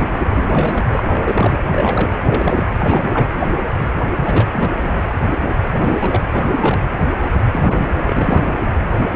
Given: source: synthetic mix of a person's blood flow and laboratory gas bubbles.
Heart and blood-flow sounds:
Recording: Doppler ultrasound of blood flow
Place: precordium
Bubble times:
0.00-0.05 s: bubbles
0.35-0.83 s: bubbles
0.92-1.59 s: bubbles
1.70-2.20 s: bubbles
2.24-2.68 s: bubbles
2.80-3.26 s: bubbles
4.16-4.95 s: bubbles
5.72-6.22 s: bubbles
6.31-6.81 s: bubbles
7.50-7.90 s: bubbles
8.06-8.59 s: bubbles
From the record:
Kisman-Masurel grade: 332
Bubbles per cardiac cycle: rolling drumbeat, 9 or more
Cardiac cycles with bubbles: 50 to 99%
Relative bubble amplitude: moderate (0.250 to 0.450)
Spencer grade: 3 (all of the cardiac periods contain showers or single bubble signals, but not dominating or overriding the cardiac motion signals)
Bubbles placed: anywhere in the cardiac cycle

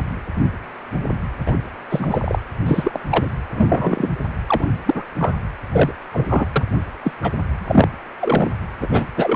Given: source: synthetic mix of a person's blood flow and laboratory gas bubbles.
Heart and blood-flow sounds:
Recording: Doppler ultrasound of blood flow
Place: precordium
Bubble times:
1.46-1.58 s: bubbles
1.90-2.41 s: bubbles
2.66-3.00 s: bubbles
3.10-3.31 s: bubbles
3.54-4.12 s: bubbles
4.46-4.69 s: bubbles
4.86-5.04 s: bubbles
5.18-5.34 s: bubbles
5.71-5.91 s: bubbles
6.12-6.46 s: bubbles
6.55-6.65 s: bubbles
7.04-7.12 s: bubbles
7.22-7.32 s: bubbles
7.59-7.88 s: bubbles
8.19-8.50 s: bubbles
8.80-9.06 s: bubbles
9.16-9.36 s: bubbles
From the record:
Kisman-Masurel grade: 233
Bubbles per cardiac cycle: several, 3 to 8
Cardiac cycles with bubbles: 50 to 99%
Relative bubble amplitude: loud (0.450 to 0.775)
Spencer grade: 3 (all of the cardiac periods contain showers or single bubble signals, but not dominating or overriding the cardiac motion signals)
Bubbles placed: anywhere in the cardiac cycle

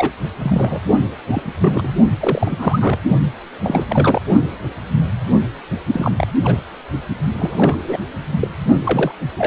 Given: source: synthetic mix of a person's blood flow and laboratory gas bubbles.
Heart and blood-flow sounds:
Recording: Doppler ultrasound of blood flow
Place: precordium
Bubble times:
0.00-0.13 s: bubbles
0.39-0.80 s: bubbles
1.27-1.42 s: bubbles
1.62-1.92 s: bubbles
2.20-2.99 s: bubbles
3.63-3.85 s: bubbles
3.89-4.21 s: bubbles
5.92-6.12 s: bubbles
6.17-6.28 s: bubbles
6.44-6.62 s: bubbles
7.38-7.76 s: bubbles
7.83-7.98 s: bubbles
8.39-8.47 s: bubbles
8.84-9.12 s: bubbles
9.37-9.47 s: bubbles
From the record:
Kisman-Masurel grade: 232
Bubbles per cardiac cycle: several, 3 to 8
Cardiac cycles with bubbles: 50 to 99%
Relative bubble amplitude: moderate (0.250 to 0.450)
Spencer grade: 3 (all of the cardiac periods contain showers or single bubble signals, but not dominating or overriding the cardiac motion signals)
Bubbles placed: only in the low amplitude regions of the cardiac cycle

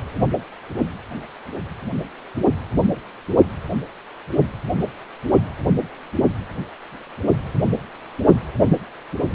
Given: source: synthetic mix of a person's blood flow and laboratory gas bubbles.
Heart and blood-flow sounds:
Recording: Doppler ultrasound of blood flow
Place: precordium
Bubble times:
9.30-9.34 s: bubbles
From the record:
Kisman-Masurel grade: 212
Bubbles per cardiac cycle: several, 3 to 8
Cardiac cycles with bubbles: 1 to 10%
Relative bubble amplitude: moderate (0.250 to 0.450)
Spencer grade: 1 (occasional bubble signal discernible with the cardiac motion signal, with majority of cardiac periods free of bubbles)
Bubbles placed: only in the low amplitude regions of the cardiac cycle

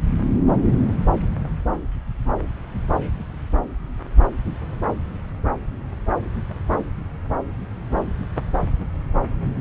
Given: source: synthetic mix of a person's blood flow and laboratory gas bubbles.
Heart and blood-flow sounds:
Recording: Doppler ultrasound of blood flow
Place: subclavian vein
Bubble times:
no bubbles
From the record:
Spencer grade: 0 (complete lack of bubble signals)

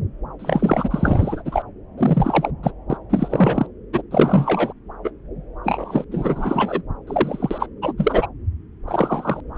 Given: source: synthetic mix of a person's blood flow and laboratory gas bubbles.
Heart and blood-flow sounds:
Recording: Doppler ultrasound of blood flow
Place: subclavian vein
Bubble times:
0.39-1.42 s: bubbles
1.44-1.62 s: bubbles
1.97-2.51 s: bubbles
2.63-2.72 s: bubbles
2.90-2.97 s: bubbles
3.10-3.67 s: bubbles
3.93-4.02 s: bubbles
4.11-4.73 s: bubbles
5.04-5.11 s: bubbles
5.64-6.04 s: bubbles
6.12-6.82 s: bubbles
7.07-7.66 s: bubbles
7.82-7.93 s: bubbles
7.97-8.27 s: bubbles
8.88-9.40 s: bubbles
9.54-9.58 s: bubbles
From the record:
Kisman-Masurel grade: 343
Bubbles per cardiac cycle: rolling drumbeat, 9 or more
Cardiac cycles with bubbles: 100%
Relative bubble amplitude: loud (0.450 to 0.775)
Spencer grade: 3 (all of the cardiac periods contain showers or single bubble signals, but not dominating or overriding the cardiac motion signals)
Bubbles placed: anywhere in the cardiac cycle

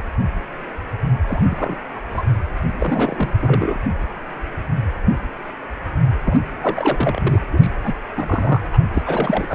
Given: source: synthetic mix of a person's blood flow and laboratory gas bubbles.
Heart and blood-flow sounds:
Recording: Doppler ultrasound of blood flow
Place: precordium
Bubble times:
1.28-1.78 s: bubbles
1.96-2.02 s: bubbles
2.08-2.25 s: bubbles
2.79-3.33 s: bubbles
3.40-3.80 s: bubbles
6.26-6.41 s: bubbles
6.61-7.41 s: bubbles
7.53-7.70 s: bubbles
7.84-7.94 s: bubbles
8.17-8.61 s: bubbles
8.73-8.78 s: bubbles
8.94-9.03 s: bubbles
9.06-9.55 s: bubbles
From the record:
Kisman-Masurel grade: 232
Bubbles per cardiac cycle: several, 3 to 8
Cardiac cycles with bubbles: 50 to 99%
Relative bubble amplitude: moderate (0.250 to 0.450)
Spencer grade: 3 (all of the cardiac periods contain showers or single bubble signals, but not dominating or overriding the cardiac motion signals)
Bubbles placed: anywhere in the cardiac cycle

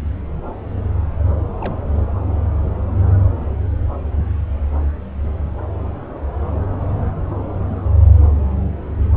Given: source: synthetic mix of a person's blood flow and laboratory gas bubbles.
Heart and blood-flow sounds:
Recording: Doppler ultrasound of blood flow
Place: subclavian vein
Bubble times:
1.60-1.75 s: bubbles
From the record:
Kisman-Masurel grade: 111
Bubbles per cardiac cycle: 1 to 2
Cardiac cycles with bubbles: 1 to 10%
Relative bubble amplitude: barely perceptible (0.100 to 0.250)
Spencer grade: 1 (occasional bubble signal discernible with the cardiac motion signal, with majority of cardiac periods free of bubbles)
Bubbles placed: anywhere in the cardiac cycle

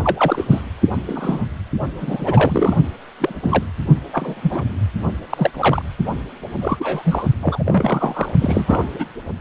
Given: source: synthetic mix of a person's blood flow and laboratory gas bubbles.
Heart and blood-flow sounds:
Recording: Doppler ultrasound of blood flow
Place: precordium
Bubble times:
0.04-0.63 s: bubbles
1.07-1.45 s: bubbles
2.00-2.77 s: bubbles
3.19-3.63 s: bubbles
4.12-4.63 s: bubbles
5.29-5.51 s: bubbles
5.54-5.82 s: bubbles
6.61-7.29 s: bubbles
7.42-7.64 s: bubbles
7.66-8.32 s: bubbles
8.39-8.90 s: bubbles
8.99-9.05 s: bubbles
From the record:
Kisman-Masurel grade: 242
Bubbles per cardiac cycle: several, 3 to 8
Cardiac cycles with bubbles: 100%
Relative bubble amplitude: moderate (0.250 to 0.450)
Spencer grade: 3 (all of the cardiac periods contain showers or single bubble signals, but not dominating or overriding the cardiac motion signals)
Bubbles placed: only in the low amplitude regions of the cardiac cycle

